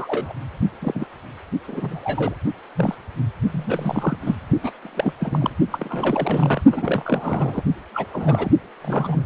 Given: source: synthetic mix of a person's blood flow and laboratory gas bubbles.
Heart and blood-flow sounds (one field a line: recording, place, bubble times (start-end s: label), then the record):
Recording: Doppler ultrasound of blood flow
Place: precordium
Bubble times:
0.00-0.33 s: bubbles
0.81-1.06 s: bubbles
1.67-2.34 s: bubbles
2.75-2.95 s: bubbles
3.51-4.17 s: bubbles
4.26-4.35 s: bubbles
4.63-4.72 s: bubbles
4.81-5.12 s: bubbles
5.20-5.50 s: bubbles
5.71-6.61 s: bubbles
6.71-7.62 s: bubbles
7.94-8.08 s: bubbles
8.12-8.50 s: bubbles
8.82-9.24 s: bubbles
From the record:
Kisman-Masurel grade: 232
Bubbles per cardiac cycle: several, 3 to 8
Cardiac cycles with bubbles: 50 to 99%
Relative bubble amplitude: moderate (0.250 to 0.450)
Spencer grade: 3 (all of the cardiac periods contain showers or single bubble signals, but not dominating or overriding the cardiac motion signals)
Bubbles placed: only in the low amplitude regions of the cardiac cycle